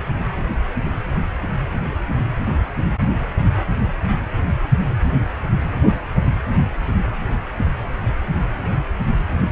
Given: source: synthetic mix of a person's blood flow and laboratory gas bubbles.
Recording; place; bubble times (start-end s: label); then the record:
Doppler ultrasound of blood flow; precordium
no bubbles
From the record:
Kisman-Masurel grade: 000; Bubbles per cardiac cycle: 0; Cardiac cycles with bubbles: 0%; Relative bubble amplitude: no bubbles discernible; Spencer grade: 0 (complete lack of bubble signals)